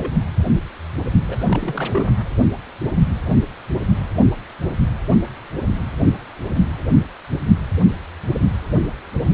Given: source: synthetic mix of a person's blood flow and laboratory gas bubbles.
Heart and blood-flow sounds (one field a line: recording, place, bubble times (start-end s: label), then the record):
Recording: Doppler ultrasound of blood flow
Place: precordium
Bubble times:
0.00-0.12 s: bubbles
1.28-2.08 s: bubbles
From the record:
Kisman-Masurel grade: 221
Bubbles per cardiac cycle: several, 3 to 8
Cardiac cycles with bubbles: 10 to 50%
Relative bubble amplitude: barely perceptible (0.100 to 0.250)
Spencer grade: 2 (many but less than half of the cardiac periods contain bubble signals, singularly or in groups)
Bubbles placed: only in the low amplitude regions of the cardiac cycle